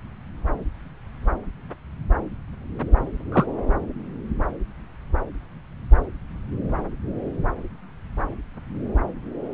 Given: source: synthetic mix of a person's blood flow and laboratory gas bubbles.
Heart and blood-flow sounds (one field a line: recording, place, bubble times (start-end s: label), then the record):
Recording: Doppler ultrasound of blood flow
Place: subclavian vein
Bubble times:
3.32-3.46 s: bubbles
From the record:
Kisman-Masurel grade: 112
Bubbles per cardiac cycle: 1 to 2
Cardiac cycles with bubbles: 1 to 10%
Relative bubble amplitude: moderate (0.250 to 0.450)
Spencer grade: 1 (occasional bubble signal discernible with the cardiac motion signal, with majority of cardiac periods free of bubbles)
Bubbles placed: anywhere in the cardiac cycle